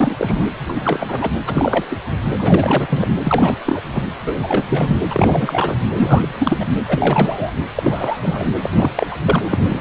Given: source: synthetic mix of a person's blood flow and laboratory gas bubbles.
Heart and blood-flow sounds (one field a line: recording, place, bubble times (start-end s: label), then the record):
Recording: Doppler ultrasound of blood flow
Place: precordium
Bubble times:
0.00-0.49 s: bubbles
0.57-1.31 s: bubbles
1.46-1.84 s: bubbles
1.90-1.99 s: bubbles
2.39-2.87 s: bubbles
2.89-3.20 s: bubbles
3.24-3.56 s: bubbles
3.65-3.80 s: bubbles
3.93-4.09 s: bubbles
4.25-4.67 s: bubbles
4.69-4.98 s: bubbles
5.09-5.76 s: bubbles
5.95-6.66 s: bubbles
6.88-7.50 s: bubbles
7.75-8.48 s: bubbles
8.63-8.90 s: bubbles
8.95-9.07 s: bubbles
9.11-9.19 s: bubbles
9.23-9.42 s: bubbles
9.49-9.81 s: bubbles
From the record:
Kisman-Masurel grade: 342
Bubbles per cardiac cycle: rolling drumbeat, 9 or more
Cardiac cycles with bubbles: 100%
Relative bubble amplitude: moderate (0.250 to 0.450)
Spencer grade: 3 (all of the cardiac periods contain showers or single bubble signals, but not dominating or overriding the cardiac motion signals)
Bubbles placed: anywhere in the cardiac cycle